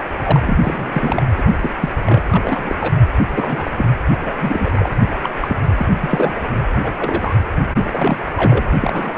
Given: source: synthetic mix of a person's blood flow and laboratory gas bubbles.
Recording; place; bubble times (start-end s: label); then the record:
Doppler ultrasound of blood flow; precordium
0.00-0.04 s: bubbles
0.23-0.40 s: bubbles
0.45-0.57 s: bubbles
0.62-1.23 s: bubbles
1.38-1.44 s: bubbles
1.46-1.51 s: bubbles
1.61-1.70 s: bubbles
1.81-1.89 s: bubbles
2.05-2.22 s: bubbles
2.31-2.75 s: bubbles
2.80-2.93 s: bubbles
3.30-3.69 s: bubbles
3.76-3.85 s: bubbles
4.26-4.89 s: bubbles
5.23-5.30 s: bubbles
5.40-5.58 s: bubbles
5.76-5.87 s: bubbles
5.90-6.35 s: bubbles
6.83-6.92 s: bubbles
6.99-7.35 s: bubbles
7.76-8.24 s: bubbles
8.37-8.65 s: bubbles
8.80-9.18 s: bubbles
From the record:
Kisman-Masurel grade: 242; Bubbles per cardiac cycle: several, 3 to 8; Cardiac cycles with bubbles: 100%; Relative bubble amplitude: moderate (0.250 to 0.450); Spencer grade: 3 (all of the cardiac periods contain showers or single bubble signals, but not dominating or overriding the cardiac motion signals); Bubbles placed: anywhere in the cardiac cycle